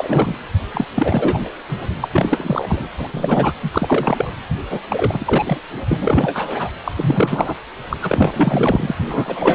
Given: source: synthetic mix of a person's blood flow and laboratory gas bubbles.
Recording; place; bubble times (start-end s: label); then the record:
Doppler ultrasound of blood flow; precordium
0.00-0.35 s: bubbles
0.71-0.84 s: bubbles
0.95-1.50 s: bubbles
1.68-1.77 s: bubbles
2.01-2.09 s: bubbles
2.12-2.89 s: bubbles
2.98-4.31 s: bubbles
4.69-4.80 s: bubbles
4.88-5.58 s: bubbles
5.88-6.70 s: bubbles
6.84-6.92 s: bubbles
6.96-7.54 s: bubbles
7.89-7.98 s: bubbles
8.02-8.95 s: bubbles
9.11-9.55 s: bubbles
From the record:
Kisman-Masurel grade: 343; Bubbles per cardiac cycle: rolling drumbeat, 9 or more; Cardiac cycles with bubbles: 100%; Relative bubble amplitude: loud (0.450 to 0.775); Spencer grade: 3 (all of the cardiac periods contain showers or single bubble signals, but not dominating or overriding the cardiac motion signals); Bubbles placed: anywhere in the cardiac cycle